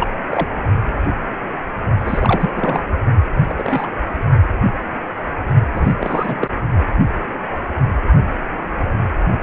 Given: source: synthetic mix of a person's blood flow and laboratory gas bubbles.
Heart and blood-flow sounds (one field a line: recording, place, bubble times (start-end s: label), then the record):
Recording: Doppler ultrasound of blood flow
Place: precordium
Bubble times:
0.00-0.08 s: bubbles
0.31-0.47 s: bubbles
2.04-2.84 s: bubbles
3.48-3.55 s: bubbles
3.58-3.88 s: bubbles
5.75-5.95 s: bubbles
6.00-6.50 s: bubbles
From the record:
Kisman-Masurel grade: 222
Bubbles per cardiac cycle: several, 3 to 8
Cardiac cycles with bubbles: 10 to 50%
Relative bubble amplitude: moderate (0.250 to 0.450)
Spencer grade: 2 (many but less than half of the cardiac periods contain bubble signals, singularly or in groups)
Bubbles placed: only in the low amplitude regions of the cardiac cycle